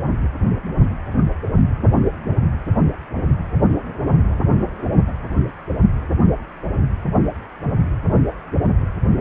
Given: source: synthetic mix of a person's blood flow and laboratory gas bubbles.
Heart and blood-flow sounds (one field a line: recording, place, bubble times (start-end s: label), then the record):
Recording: Doppler ultrasound of blood flow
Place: precordium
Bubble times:
no bubbles
From the record:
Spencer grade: 0 (complete lack of bubble signals)